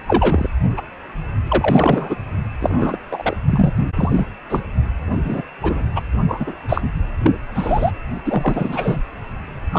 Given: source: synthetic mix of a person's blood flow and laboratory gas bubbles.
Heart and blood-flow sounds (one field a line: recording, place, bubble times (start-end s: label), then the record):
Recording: Doppler ultrasound of blood flow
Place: precordium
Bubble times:
0.07-0.50 s: bubbles
0.77-0.82 s: bubbles
1.46-2.15 s: bubbles
2.60-2.98 s: bubbles
3.09-3.36 s: bubbles
3.47-3.73 s: bubbles
3.96-4.24 s: bubbles
4.49-4.60 s: bubbles
5.10-5.18 s: bubbles
5.25-5.42 s: bubbles
5.62-5.88 s: bubbles
5.95-6.01 s: bubbles
6.28-6.55 s: bubbles
6.68-6.82 s: bubbles
7.23-7.32 s: bubbles
7.54-7.91 s: bubbles
8.26-9.02 s: bubbles
9.72-9.79 s: bubbles
From the record:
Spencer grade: 3 (all of the cardiac periods contain showers or single bubble signals, but not dominating or overriding the cardiac motion signals)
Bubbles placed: anywhere in the cardiac cycle